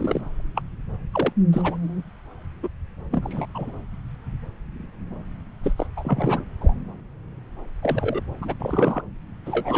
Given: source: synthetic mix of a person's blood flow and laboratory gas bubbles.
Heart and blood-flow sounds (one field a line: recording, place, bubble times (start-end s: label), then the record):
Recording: Doppler ultrasound of blood flow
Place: subclavian vein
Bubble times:
0.00-0.21 s: bubbles
0.55-0.62 s: bubbles
1.12-1.32 s: bubbles
1.52-1.77 s: bubbles
2.62-2.68 s: bubbles
3.11-3.46 s: bubbles
3.54-3.71 s: bubbles
5.63-5.73 s: bubbles
5.77-5.87 s: bubbles
5.97-6.44 s: bubbles
6.61-6.74 s: bubbles
7.82-8.21 s: bubbles
8.42-8.54 s: bubbles
8.59-9.01 s: bubbles
9.46-9.78 s: bubbles
From the record:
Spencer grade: 3 (all of the cardiac periods contain showers or single bubble signals, but not dominating or overriding the cardiac motion signals)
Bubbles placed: anywhere in the cardiac cycle